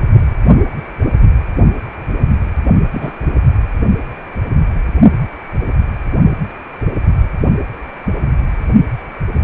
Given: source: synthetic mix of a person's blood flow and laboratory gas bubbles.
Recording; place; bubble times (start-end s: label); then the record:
Doppler ultrasound of blood flow; precordium
2.92-3.13 s: bubbles
From the record:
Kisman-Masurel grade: 122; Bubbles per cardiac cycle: 1 to 2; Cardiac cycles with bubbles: 10 to 50%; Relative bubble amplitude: moderate (0.250 to 0.450); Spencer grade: 2 (many but less than half of the cardiac periods contain bubble signals, singularly or in groups); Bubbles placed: only in the low amplitude regions of the cardiac cycle